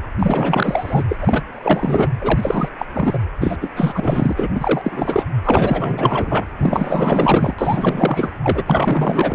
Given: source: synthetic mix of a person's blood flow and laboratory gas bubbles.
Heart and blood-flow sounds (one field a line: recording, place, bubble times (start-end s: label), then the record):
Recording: Doppler ultrasound of blood flow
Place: precordium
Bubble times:
0.19-1.04 s: bubbles
1.09-1.18 s: bubbles
1.21-1.45 s: bubbles
1.52-2.08 s: bubbles
2.21-2.69 s: bubbles
2.79-2.86 s: bubbles
2.93-3.18 s: bubbles
3.40-3.57 s: bubbles
3.61-3.68 s: bubbles
3.75-4.33 s: bubbles
4.37-4.49 s: bubbles
4.54-5.23 s: bubbles
5.43-6.45 s: bubbles
6.58-7.54 s: bubbles
7.58-8.32 s: bubbles
8.44-9.35 s: bubbles
From the record:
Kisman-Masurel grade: 444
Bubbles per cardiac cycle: continuous sound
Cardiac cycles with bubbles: 100%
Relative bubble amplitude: maximal (0.775 to 0.999)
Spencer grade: 4 (maximum detectable bubble signal sounding continuously throughout systole and diastole of every cardiac period, and overriding the amplitude of the normal cardiac signals)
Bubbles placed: anywhere in the cardiac cycle